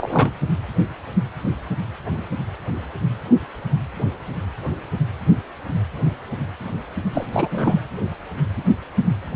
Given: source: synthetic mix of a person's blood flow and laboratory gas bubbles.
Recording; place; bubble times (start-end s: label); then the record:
Doppler ultrasound of blood flow; precordium
0.00-0.32 s: bubbles
7.14-7.25 s: bubbles
7.33-7.80 s: bubbles
From the record:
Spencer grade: 1 (occasional bubble signal discernible with the cardiac motion signal, with majority of cardiac periods free of bubbles); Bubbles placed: anywhere in the cardiac cycle